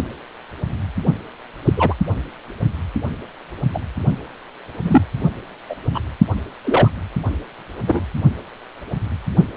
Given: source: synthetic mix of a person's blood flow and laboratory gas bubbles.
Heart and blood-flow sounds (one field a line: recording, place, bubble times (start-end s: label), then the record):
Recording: Doppler ultrasound of blood flow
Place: precordium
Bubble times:
1.65-1.73 s: bubbles
1.77-1.94 s: bubbles
3.74-3.79 s: bubbles
4.84-5.02 s: bubbles
5.70-5.75 s: bubbles
5.94-6.00 s: bubbles
6.64-6.89 s: bubbles
7.87-8.02 s: bubbles
From the record:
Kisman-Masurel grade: 123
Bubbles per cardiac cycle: 1 to 2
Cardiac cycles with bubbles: 10 to 50%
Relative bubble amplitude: loud (0.450 to 0.775)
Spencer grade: 2 (many but less than half of the cardiac periods contain bubble signals, singularly or in groups)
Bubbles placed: only in the low amplitude regions of the cardiac cycle